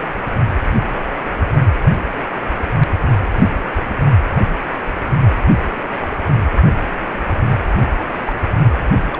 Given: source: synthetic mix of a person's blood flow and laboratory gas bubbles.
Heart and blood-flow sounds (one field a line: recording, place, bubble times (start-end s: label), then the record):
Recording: Doppler ultrasound of blood flow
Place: precordium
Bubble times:
0.93-1.01 s: bubbles
1.61-1.70 s: bubbles
5.92-5.96 s: bubbles
6.10-6.14 s: bubbles
8.08-8.35 s: bubbles
9.12-9.19 s: bubbles
From the record:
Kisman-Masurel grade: 121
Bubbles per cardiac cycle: 1 to 2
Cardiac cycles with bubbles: 10 to 50%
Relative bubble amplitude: barely perceptible (0.100 to 0.250)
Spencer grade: 2 (many but less than half of the cardiac periods contain bubble signals, singularly or in groups)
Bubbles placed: anywhere in the cardiac cycle